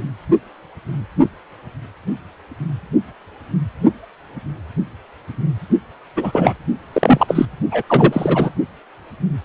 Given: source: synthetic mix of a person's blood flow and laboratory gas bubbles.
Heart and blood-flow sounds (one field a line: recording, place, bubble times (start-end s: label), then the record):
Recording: Doppler ultrasound of blood flow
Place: precordium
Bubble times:
6.16-6.53 s: bubbles
6.93-7.46 s: bubbles
7.71-7.82 s: bubbles
7.87-8.50 s: bubbles
From the record:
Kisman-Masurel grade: 223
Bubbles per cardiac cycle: several, 3 to 8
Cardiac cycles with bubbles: 10 to 50%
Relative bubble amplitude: loud (0.450 to 0.775)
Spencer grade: 2 (many but less than half of the cardiac periods contain bubble signals, singularly or in groups)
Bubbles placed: only in the low amplitude regions of the cardiac cycle